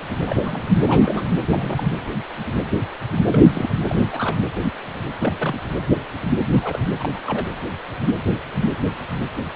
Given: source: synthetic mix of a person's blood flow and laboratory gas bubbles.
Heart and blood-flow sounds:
Doppler ultrasound of blood flow; precordium
0.26-0.76 s: bubbles
0.86-1.25 s: bubbles
1.42-1.46 s: bubbles
1.50-1.92 s: bubbles
3.31-3.40 s: bubbles
3.45-3.74 s: bubbles
3.89-4.05 s: bubbles
4.11-4.37 s: bubbles
5.19-5.33 s: bubbles
5.39-5.59 s: bubbles
6.46-6.83 s: bubbles
7.00-7.09 s: bubbles
7.14-7.19 s: bubbles
7.25-7.46 s: bubbles
From the record:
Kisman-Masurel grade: 221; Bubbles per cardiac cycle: several, 3 to 8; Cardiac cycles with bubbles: 10 to 50%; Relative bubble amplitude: barely perceptible (0.100 to 0.250); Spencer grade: 2 (many but less than half of the cardiac periods contain bubble signals, singularly or in groups); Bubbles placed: anywhere in the cardiac cycle

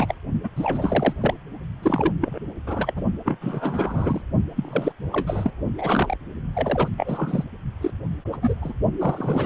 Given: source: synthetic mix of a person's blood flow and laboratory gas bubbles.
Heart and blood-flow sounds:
Doppler ultrasound of blood flow; precordium
0.00-0.15 s: bubbles
0.43-0.49 s: bubbles
0.56-1.14 s: bubbles
1.21-1.34 s: bubbles
1.82-2.14 s: bubbles
2.21-2.39 s: bubbles
2.67-3.02 s: bubbles
3.25-3.37 s: bubbles
3.41-4.21 s: bubbles
4.55-4.92 s: bubbles
5.12-5.51 s: bubbles
5.78-6.16 s: bubbles
6.53-6.88 s: bubbles
6.96-7.44 s: bubbles
7.80-7.91 s: bubbles
8.32-8.37 s: bubbles
8.41-8.54 s: bubbles
8.61-8.72 s: bubbles
8.98-9.46 s: bubbles
From the record:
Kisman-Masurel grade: 342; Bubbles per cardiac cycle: rolling drumbeat, 9 or more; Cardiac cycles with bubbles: 100%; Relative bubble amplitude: moderate (0.250 to 0.450); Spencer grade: 3 (all of the cardiac periods contain showers or single bubble signals, but not dominating or overriding the cardiac motion signals); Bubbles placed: only in the low amplitude regions of the cardiac cycle

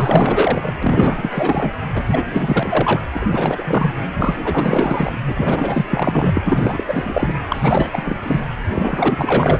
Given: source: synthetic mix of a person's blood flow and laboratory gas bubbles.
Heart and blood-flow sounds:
Doppler ultrasound of blood flow; precordium
0.00-0.73 s: bubbles
0.82-1.72 s: bubbles
1.95-3.01 s: bubbles
3.14-3.26 s: bubbles
3.31-3.95 s: bubbles
4.16-4.38 s: bubbles
4.44-5.12 s: bubbles
5.25-5.85 s: bubbles
5.88-6.84 s: bubbles
6.88-7.33 s: bubbles
7.48-8.17 s: bubbles
8.22-8.40 s: bubbles
8.73-9.60 s: bubbles
From the record:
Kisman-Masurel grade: 444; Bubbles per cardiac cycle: continuous sound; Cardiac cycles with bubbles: 100%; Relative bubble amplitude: maximal (0.775 to 0.999); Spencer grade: 4 (maximum detectable bubble signal sounding continuously throughout systole and diastole of every cardiac period, and overriding the amplitude of the normal cardiac signals); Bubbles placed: anywhere in the cardiac cycle

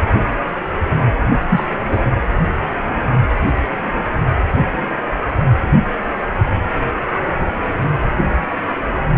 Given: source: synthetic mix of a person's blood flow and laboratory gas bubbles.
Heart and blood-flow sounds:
Doppler ultrasound of blood flow; precordium
1.49-1.65 s: bubbles
1.91-1.99 s: bubbles
From the record:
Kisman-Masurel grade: 213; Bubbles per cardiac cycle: several, 3 to 8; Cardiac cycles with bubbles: 1 to 10%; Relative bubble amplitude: loud (0.450 to 0.775); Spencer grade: 1 (occasional bubble signal discernible with the cardiac motion signal, with majority of cardiac periods free of bubbles); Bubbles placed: anywhere in the cardiac cycle

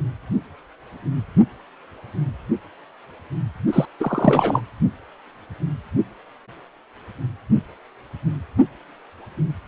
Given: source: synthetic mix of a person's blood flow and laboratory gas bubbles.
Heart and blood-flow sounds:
Doppler ultrasound of blood flow; precordium
3.73-3.85 s: bubbles
4.00-4.61 s: bubbles
From the record:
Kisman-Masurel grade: 213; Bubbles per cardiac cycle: several, 3 to 8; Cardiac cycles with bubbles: 1 to 10%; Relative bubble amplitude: loud (0.450 to 0.775); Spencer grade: 1 (occasional bubble signal discernible with the cardiac motion signal, with majority of cardiac periods free of bubbles); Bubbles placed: anywhere in the cardiac cycle

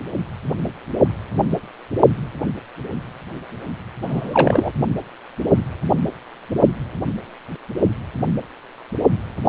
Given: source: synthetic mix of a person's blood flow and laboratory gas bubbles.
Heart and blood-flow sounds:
Doppler ultrasound of blood flow; precordium
4.01-4.71 s: bubbles
From the record:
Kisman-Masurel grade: 223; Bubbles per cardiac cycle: several, 3 to 8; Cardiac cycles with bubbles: 10 to 50%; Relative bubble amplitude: loud (0.450 to 0.775); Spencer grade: 2 (many but less than half of the cardiac periods contain bubble signals, singularly or in groups); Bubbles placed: only in the low amplitude regions of the cardiac cycle

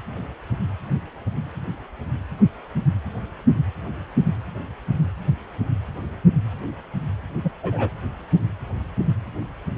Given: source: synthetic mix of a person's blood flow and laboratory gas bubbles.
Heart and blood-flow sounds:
Doppler ultrasound of blood flow; precordium
7.44-7.52 s: bubbles
7.62-7.90 s: bubbles
From the record:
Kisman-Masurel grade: 112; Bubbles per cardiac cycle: 1 to 2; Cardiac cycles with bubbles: 1 to 10%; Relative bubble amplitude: moderate (0.250 to 0.450); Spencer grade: 1 (occasional bubble signal discernible with the cardiac motion signal, with majority of cardiac periods free of bubbles); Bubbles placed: anywhere in the cardiac cycle

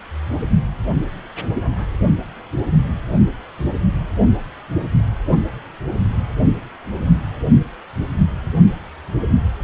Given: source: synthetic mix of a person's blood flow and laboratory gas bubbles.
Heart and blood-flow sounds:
Doppler ultrasound of blood flow; precordium
no bubbles
From the record:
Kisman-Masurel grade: 000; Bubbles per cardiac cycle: 0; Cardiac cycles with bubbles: 0%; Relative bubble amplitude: no bubbles discernible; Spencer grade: 0 (complete lack of bubble signals)

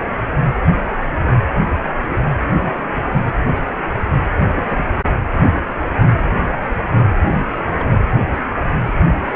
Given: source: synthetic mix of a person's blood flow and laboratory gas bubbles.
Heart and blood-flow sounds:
Doppler ultrasound of blood flow; precordium
2.52-2.89 s: bubbles
3.08-3.17 s: bubbles
3.22-3.31 s: bubbles
4.55-4.90 s: bubbles
7.29-7.43 s: bubbles
7.69-7.94 s: bubbles
From the record:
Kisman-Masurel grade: 221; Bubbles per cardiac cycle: several, 3 to 8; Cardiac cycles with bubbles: 10 to 50%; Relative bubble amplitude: barely perceptible (0.100 to 0.250); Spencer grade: 2 (many but less than half of the cardiac periods contain bubble signals, singularly or in groups); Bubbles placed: anywhere in the cardiac cycle

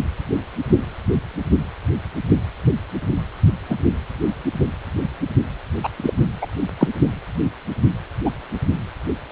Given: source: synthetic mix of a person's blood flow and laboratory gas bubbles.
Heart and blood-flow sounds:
Doppler ultrasound of blood flow; precordium
3.70-3.77 s: bubbles
5.83-5.89 s: bubbles
5.97-6.12 s: bubbles
6.41-6.46 s: bubbles
6.80-6.88 s: bubbles
8.25-8.30 s: bubbles
From the record:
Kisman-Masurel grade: 123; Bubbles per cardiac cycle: 1 to 2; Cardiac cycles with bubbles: 10 to 50%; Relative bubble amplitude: loud (0.450 to 0.775); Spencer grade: 2 (many but less than half of the cardiac periods contain bubble signals, singularly or in groups); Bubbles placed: only in the low amplitude regions of the cardiac cycle

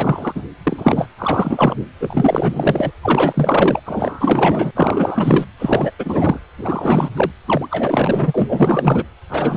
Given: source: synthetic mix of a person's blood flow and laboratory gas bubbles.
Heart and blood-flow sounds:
Doppler ultrasound of blood flow; precordium
0.00-0.42 s: bubbles
0.64-1.08 s: bubbles
1.18-1.76 s: bubbles
2.00-2.92 s: bubbles
3.02-3.79 s: bubbles
3.85-4.71 s: bubbles
4.75-5.46 s: bubbles
5.59-5.92 s: bubbles
5.99-6.38 s: bubbles
6.58-7.09 s: bubbles
7.16-7.31 s: bubbles
7.46-9.04 s: bubbles
9.29-9.57 s: bubbles
From the record:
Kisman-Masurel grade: 444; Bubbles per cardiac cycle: continuous sound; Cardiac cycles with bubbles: 100%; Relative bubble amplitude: maximal (0.775 to 0.999); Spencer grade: 4 (maximum detectable bubble signal sounding continuously throughout systole and diastole of every cardiac period, and overriding the amplitude of the normal cardiac signals); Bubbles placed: anywhere in the cardiac cycle

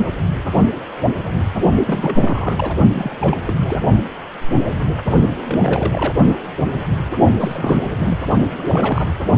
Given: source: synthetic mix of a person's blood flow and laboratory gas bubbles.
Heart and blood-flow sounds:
Doppler ultrasound of blood flow; precordium
1.86-2.77 s: bubbles
2.92-3.37 s: bubbles
3.41-3.54 s: bubbles
3.65-3.79 s: bubbles
5.50-6.14 s: bubbles
7.40-8.19 s: bubbles
8.56-9.10 s: bubbles
From the record:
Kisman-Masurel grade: 332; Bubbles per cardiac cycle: rolling drumbeat, 9 or more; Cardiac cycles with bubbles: 50 to 99%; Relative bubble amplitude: moderate (0.250 to 0.450); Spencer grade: 3 (all of the cardiac periods contain showers or single bubble signals, but not dominating or overriding the cardiac motion signals); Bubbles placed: only in the low amplitude regions of the cardiac cycle

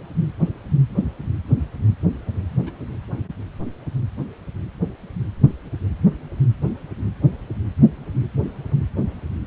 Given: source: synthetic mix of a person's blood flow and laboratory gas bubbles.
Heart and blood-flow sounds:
Doppler ultrasound of blood flow; precordium
2.66-2.71 s: bubbles
From the record:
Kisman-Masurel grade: 111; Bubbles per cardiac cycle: 1 to 2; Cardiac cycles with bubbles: 1 to 10%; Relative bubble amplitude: barely perceptible (0.100 to 0.250); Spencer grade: 1 (occasional bubble signal discernible with the cardiac motion signal, with majority of cardiac periods free of bubbles); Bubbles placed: anywhere in the cardiac cycle

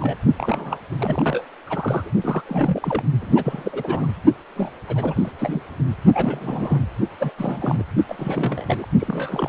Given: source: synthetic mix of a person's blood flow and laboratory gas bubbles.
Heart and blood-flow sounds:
Doppler ultrasound of blood flow; precordium
0.00-0.17 s: bubbles
0.37-0.79 s: bubbles
0.99-1.45 s: bubbles
1.67-2.11 s: bubbles
2.21-3.02 s: bubbles
3.21-4.11 s: bubbles
4.56-4.73 s: bubbles
4.87-5.32 s: bubbles
5.38-5.62 s: bubbles
6.13-6.83 s: bubbles
7.18-7.33 s: bubbles
7.38-7.83 s: bubbles
8.08-8.86 s: bubbles
8.99-9.49 s: bubbles
From the record:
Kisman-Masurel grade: 342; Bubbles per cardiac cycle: rolling drumbeat, 9 or more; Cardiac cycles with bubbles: 100%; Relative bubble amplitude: moderate (0.250 to 0.450); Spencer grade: 3 (all of the cardiac periods contain showers or single bubble signals, but not dominating or overriding the cardiac motion signals); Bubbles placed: only in the low amplitude regions of the cardiac cycle

